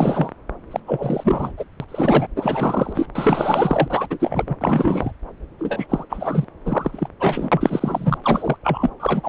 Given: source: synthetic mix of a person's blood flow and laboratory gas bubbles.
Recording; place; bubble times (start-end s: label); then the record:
Doppler ultrasound of blood flow; subclavian vein
0.00-0.31 s: bubbles
0.71-0.80 s: bubbles
0.87-1.52 s: bubbles
1.57-1.65 s: bubbles
1.80-1.84 s: bubbles
1.88-2.27 s: bubbles
2.36-3.07 s: bubbles
3.14-4.56 s: bubbles
4.61-5.12 s: bubbles
5.59-5.87 s: bubbles
5.89-6.04 s: bubbles
6.10-6.45 s: bubbles
6.65-7.08 s: bubbles
7.20-8.18 s: bubbles
8.22-8.56 s: bubbles
8.63-8.90 s: bubbles
8.99-9.29 s: bubbles
From the record:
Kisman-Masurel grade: 343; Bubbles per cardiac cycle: rolling drumbeat, 9 or more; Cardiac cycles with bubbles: 100%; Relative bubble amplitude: loud (0.450 to 0.775); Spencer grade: 3 (all of the cardiac periods contain showers or single bubble signals, but not dominating or overriding the cardiac motion signals); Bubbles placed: anywhere in the cardiac cycle